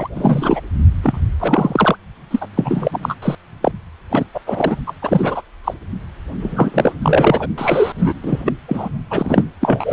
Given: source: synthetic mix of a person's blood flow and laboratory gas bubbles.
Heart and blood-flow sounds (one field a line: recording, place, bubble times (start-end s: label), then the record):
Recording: Doppler ultrasound of blood flow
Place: precordium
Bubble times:
0.00-0.08 s: bubbles
0.15-0.60 s: bubbles
1.02-1.26 s: bubbles
1.40-1.96 s: bubbles
2.31-2.46 s: bubbles
2.56-3.15 s: bubbles
3.22-3.35 s: bubbles
3.62-3.72 s: bubbles
4.09-4.25 s: bubbles
4.34-4.39 s: bubbles
4.46-4.76 s: bubbles
4.87-4.92 s: bubbles
5.02-5.42 s: bubbles
5.64-5.74 s: bubbles
6.39-6.93 s: bubbles
7.02-7.47 s: bubbles
7.58-7.92 s: bubbles
7.99-8.12 s: bubbles
8.23-8.53 s: bubbles
8.68-8.89 s: bubbles
9.10-9.44 s: bubbles
9.61-9.93 s: bubbles
From the record:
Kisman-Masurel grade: 343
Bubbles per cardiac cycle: rolling drumbeat, 9 or more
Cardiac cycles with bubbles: 100%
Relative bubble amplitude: loud (0.450 to 0.775)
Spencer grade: 3 (all of the cardiac periods contain showers or single bubble signals, but not dominating or overriding the cardiac motion signals)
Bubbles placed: only in the low amplitude regions of the cardiac cycle